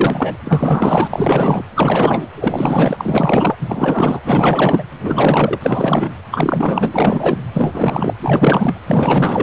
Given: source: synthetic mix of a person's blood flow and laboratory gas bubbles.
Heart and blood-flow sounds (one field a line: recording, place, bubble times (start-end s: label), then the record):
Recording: Doppler ultrasound of blood flow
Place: precordium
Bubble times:
0.00-0.38 s: bubbles
0.44-1.08 s: bubbles
1.10-1.65 s: bubbles
1.75-2.28 s: bubbles
2.36-3.56 s: bubbles
3.61-4.20 s: bubbles
4.25-4.83 s: bubbles
5.04-6.10 s: bubbles
6.30-7.38 s: bubbles
7.53-8.15 s: bubbles
8.22-8.81 s: bubbles
8.86-9.43 s: bubbles
From the record:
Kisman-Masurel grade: 444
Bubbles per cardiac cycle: continuous sound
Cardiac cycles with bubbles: 100%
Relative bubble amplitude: maximal (0.775 to 0.999)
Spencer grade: 4 (maximum detectable bubble signal sounding continuously throughout systole and diastole of every cardiac period, and overriding the amplitude of the normal cardiac signals)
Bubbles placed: anywhere in the cardiac cycle